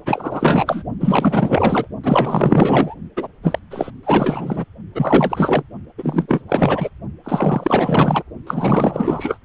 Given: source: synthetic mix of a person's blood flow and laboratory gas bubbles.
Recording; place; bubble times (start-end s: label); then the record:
Doppler ultrasound of blood flow; precordium
0.05-0.83 s: bubbles
0.99-1.88 s: bubbles
2.03-2.95 s: bubbles
3.17-3.27 s: bubbles
3.43-3.59 s: bubbles
3.71-3.91 s: bubbles
4.03-4.65 s: bubbles
4.95-5.62 s: bubbles
5.98-6.42 s: bubbles
6.48-6.90 s: bubbles
7.24-8.23 s: bubbles
8.46-9.38 s: bubbles
From the record:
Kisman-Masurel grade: 444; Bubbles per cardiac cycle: continuous sound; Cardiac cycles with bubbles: 100%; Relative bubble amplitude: maximal (0.775 to 0.999); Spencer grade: 4 (maximum detectable bubble signal sounding continuously throughout systole and diastole of every cardiac period, and overriding the amplitude of the normal cardiac signals); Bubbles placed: only in the low amplitude regions of the cardiac cycle